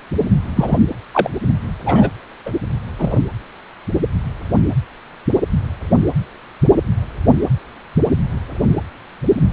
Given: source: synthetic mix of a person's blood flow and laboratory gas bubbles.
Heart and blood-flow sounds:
Doppler ultrasound of blood flow; precordium
0.56-0.78 s: bubbles
1.14-1.28 s: bubbles
1.86-2.10 s: bubbles
2.46-2.52 s: bubbles
2.99-3.21 s: bubbles
From the record:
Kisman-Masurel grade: 123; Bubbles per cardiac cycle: 1 to 2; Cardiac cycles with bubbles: 10 to 50%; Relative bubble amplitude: loud (0.450 to 0.775); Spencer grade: 2 (many but less than half of the cardiac periods contain bubble signals, singularly or in groups); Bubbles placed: anywhere in the cardiac cycle

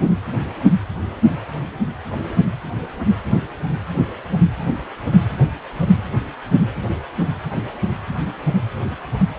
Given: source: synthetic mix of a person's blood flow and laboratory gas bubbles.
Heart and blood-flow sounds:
Doppler ultrasound of blood flow; precordium
9.37-9.39 s: bubbles
From the record:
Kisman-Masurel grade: 212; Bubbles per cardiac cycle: several, 3 to 8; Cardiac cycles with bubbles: 1 to 10%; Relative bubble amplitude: moderate (0.250 to 0.450); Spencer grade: 1 (occasional bubble signal discernible with the cardiac motion signal, with majority of cardiac periods free of bubbles); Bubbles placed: anywhere in the cardiac cycle

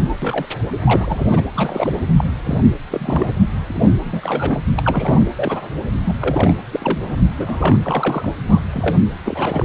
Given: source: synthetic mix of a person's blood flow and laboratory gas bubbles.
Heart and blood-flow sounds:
Doppler ultrasound of blood flow; precordium
0.00-0.15 s: bubbles
0.22-0.46 s: bubbles
0.85-1.45 s: bubbles
1.55-2.09 s: bubbles
2.17-2.30 s: bubbles
2.45-2.61 s: bubbles
2.91-3.34 s: bubbles
3.68-3.93 s: bubbles
4.04-4.60 s: bubbles
4.77-5.29 s: bubbles
5.36-5.70 s: bubbles
6.04-6.16 s: bubbles
6.20-6.53 s: bubbles
6.71-6.99 s: bubbles
7.03-7.16 s: bubbles
7.37-7.77 s: bubbles
7.83-8.34 s: bubbles
8.47-8.60 s: bubbles
8.71-9.02 s: bubbles
9.25-9.65 s: bubbles
From the record:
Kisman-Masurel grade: 242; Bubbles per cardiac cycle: several, 3 to 8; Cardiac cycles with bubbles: 100%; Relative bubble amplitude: moderate (0.250 to 0.450); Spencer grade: 3 (all of the cardiac periods contain showers or single bubble signals, but not dominating or overriding the cardiac motion signals); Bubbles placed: anywhere in the cardiac cycle

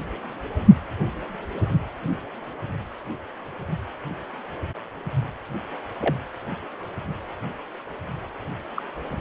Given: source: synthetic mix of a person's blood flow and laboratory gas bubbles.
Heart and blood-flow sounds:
Doppler ultrasound of blood flow; precordium
6.00-6.15 s: bubbles
8.77-8.82 s: bubbles
From the record:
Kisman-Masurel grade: 121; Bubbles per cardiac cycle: 1 to 2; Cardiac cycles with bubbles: 10 to 50%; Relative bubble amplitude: barely perceptible (0.100 to 0.250); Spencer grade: 2 (many but less than half of the cardiac periods contain bubble signals, singularly or in groups); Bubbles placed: only in the low amplitude regions of the cardiac cycle

